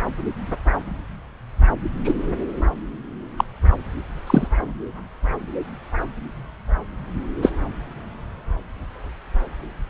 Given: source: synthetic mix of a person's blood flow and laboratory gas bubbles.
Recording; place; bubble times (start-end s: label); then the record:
Doppler ultrasound of blood flow; subclavian vein
2.04-2.15 s: bubbles
3.38-3.44 s: bubbles
4.27-4.48 s: bubbles
7.42-7.52 s: bubbles
From the record:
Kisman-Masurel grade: 123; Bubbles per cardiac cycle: 1 to 2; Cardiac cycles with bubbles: 10 to 50%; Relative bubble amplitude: loud (0.450 to 0.775); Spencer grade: 2 (many but less than half of the cardiac periods contain bubble signals, singularly or in groups); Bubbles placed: anywhere in the cardiac cycle